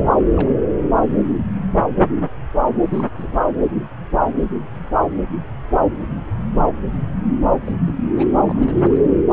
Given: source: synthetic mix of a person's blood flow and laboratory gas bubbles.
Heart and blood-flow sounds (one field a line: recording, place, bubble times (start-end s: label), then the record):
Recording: Doppler ultrasound of blood flow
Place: subclavian vein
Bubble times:
0.18-0.25 s: bubbles
0.36-0.49 s: bubbles
2.80-3.09 s: bubbles
3.17-3.27 s: bubbles
3.31-3.38 s: bubbles
7.64-7.72 s: bubbles
7.87-7.95 s: bubbles
8.16-8.27 s: bubbles
8.44-9.02 s: bubbles
From the record:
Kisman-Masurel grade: 221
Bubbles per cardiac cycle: several, 3 to 8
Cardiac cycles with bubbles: 10 to 50%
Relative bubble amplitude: barely perceptible (0.100 to 0.250)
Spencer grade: 2 (many but less than half of the cardiac periods contain bubble signals, singularly or in groups)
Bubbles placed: anywhere in the cardiac cycle